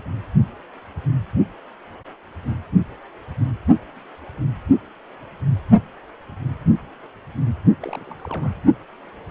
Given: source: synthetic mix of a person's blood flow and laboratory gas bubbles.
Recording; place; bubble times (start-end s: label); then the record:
Doppler ultrasound of blood flow; precordium
7.82-8.54 s: bubbles
From the record:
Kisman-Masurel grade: 211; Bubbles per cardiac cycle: several, 3 to 8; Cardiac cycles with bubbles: 1 to 10%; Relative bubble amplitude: barely perceptible (0.100 to 0.250); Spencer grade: 1 (occasional bubble signal discernible with the cardiac motion signal, with majority of cardiac periods free of bubbles); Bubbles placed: only in the low amplitude regions of the cardiac cycle